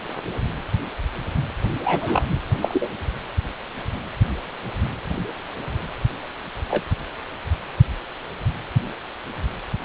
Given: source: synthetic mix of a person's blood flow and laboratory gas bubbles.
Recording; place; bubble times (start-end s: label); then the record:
Doppler ultrasound of blood flow; precordium
1.84-2.25 s: bubbles
2.61-2.89 s: bubbles
6.70-6.83 s: bubbles
From the record:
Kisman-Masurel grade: 122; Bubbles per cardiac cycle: 1 to 2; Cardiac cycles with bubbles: 10 to 50%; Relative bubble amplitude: moderate (0.250 to 0.450); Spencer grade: 2 (many but less than half of the cardiac periods contain bubble signals, singularly or in groups); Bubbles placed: anywhere in the cardiac cycle